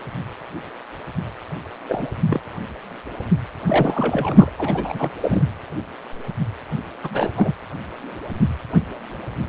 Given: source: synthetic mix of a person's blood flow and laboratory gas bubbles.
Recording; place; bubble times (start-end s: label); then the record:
Doppler ultrasound of blood flow; precordium
1.88-2.06 s: bubbles
2.26-2.40 s: bubbles
3.67-4.50 s: bubbles
4.58-5.10 s: bubbles
5.21-5.43 s: bubbles
6.72-6.79 s: bubbles
7.03-7.31 s: bubbles
7.36-7.55 s: bubbles
From the record:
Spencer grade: 2 (many but less than half of the cardiac periods contain bubble signals, singularly or in groups); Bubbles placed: anywhere in the cardiac cycle